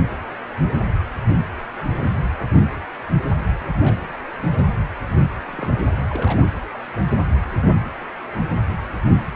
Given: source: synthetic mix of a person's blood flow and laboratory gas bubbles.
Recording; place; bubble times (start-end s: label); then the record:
Doppler ultrasound of blood flow; precordium
3.60-3.63 s: bubbles
3.80-4.18 s: bubbles
4.48-4.68 s: bubbles
5.45-5.78 s: bubbles
5.91-6.04 s: bubbles
6.06-6.45 s: bubbles
From the record:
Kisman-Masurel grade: 221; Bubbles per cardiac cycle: several, 3 to 8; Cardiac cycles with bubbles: 10 to 50%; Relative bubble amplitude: barely perceptible (0.100 to 0.250); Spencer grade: 2 (many but less than half of the cardiac periods contain bubble signals, singularly or in groups); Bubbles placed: anywhere in the cardiac cycle